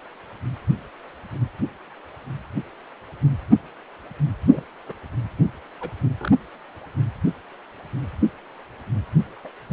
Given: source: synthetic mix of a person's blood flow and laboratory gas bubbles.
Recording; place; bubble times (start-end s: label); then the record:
Doppler ultrasound of blood flow; precordium
4.47-4.63 s: bubbles
4.87-4.94 s: bubbles
5.80-5.91 s: bubbles
6.20-6.32 s: bubbles
9.44-9.50 s: bubbles
9.70-9.72 s: bubbles
From the record:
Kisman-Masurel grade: 121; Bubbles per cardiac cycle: 1 to 2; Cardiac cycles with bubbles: 10 to 50%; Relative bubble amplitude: barely perceptible (0.100 to 0.250); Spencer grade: 2 (many but less than half of the cardiac periods contain bubble signals, singularly or in groups); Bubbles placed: anywhere in the cardiac cycle